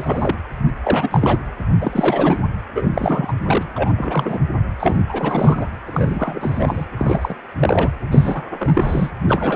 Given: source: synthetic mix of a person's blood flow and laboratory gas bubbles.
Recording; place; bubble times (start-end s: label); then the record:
Doppler ultrasound of blood flow; precordium
0.00-0.36 s: bubbles
0.83-1.38 s: bubbles
1.81-2.39 s: bubbles
2.75-2.89 s: bubbles
2.94-3.33 s: bubbles
3.46-3.65 s: bubbles
3.76-4.39 s: bubbles
4.79-4.97 s: bubbles
5.08-5.67 s: bubbles
5.86-6.86 s: bubbles
6.97-7.34 s: bubbles
7.59-7.92 s: bubbles
8.12-8.43 s: bubbles
8.59-9.11 s: bubbles
9.28-9.55 s: bubbles
From the record:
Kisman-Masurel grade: 342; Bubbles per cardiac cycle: rolling drumbeat, 9 or more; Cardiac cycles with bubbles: 100%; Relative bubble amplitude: moderate (0.250 to 0.450); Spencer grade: 3 (all of the cardiac periods contain showers or single bubble signals, but not dominating or overriding the cardiac motion signals); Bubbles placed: anywhere in the cardiac cycle